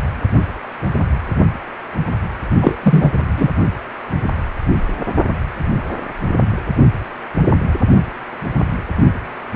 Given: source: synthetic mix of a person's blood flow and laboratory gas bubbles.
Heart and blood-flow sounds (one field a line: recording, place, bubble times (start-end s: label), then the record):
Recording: Doppler ultrasound of blood flow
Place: precordium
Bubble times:
2.61-2.75 s: bubbles
2.82-3.10 s: bubbles
3.36-3.48 s: bubbles
From the record:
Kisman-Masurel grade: 223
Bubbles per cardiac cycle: several, 3 to 8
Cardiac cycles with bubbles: 10 to 50%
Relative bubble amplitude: loud (0.450 to 0.775)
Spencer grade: 2 (many but less than half of the cardiac periods contain bubble signals, singularly or in groups)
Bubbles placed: only in the low amplitude regions of the cardiac cycle